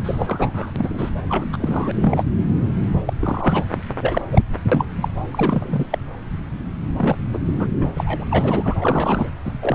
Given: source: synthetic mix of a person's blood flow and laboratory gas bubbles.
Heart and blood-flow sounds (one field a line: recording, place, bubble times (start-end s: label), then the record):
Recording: Doppler ultrasound of blood flow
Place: subclavian vein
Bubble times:
0.04-0.71 s: bubbles
0.75-1.10 s: bubbles
1.29-1.47 s: bubbles
1.53-1.92 s: bubbles
1.94-2.23 s: bubbles
3.06-3.13 s: bubbles
3.19-3.65 s: bubbles
4.01-4.21 s: bubbles
4.30-4.42 s: bubbles
4.71-4.84 s: bubbles
4.97-5.08 s: bubbles
5.31-5.86 s: bubbles
5.90-5.98 s: bubbles
6.96-7.16 s: bubbles
7.33-7.39 s: bubbles
7.59-7.67 s: bubbles
7.79-7.88 s: bubbles
7.95-8.26 s: bubbles
8.31-8.77 s: bubbles
8.80-9.30 s: bubbles
9.45-9.52 s: bubbles
9.62-9.74 s: bubbles
From the record:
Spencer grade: 3 (all of the cardiac periods contain showers or single bubble signals, but not dominating or overriding the cardiac motion signals)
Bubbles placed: anywhere in the cardiac cycle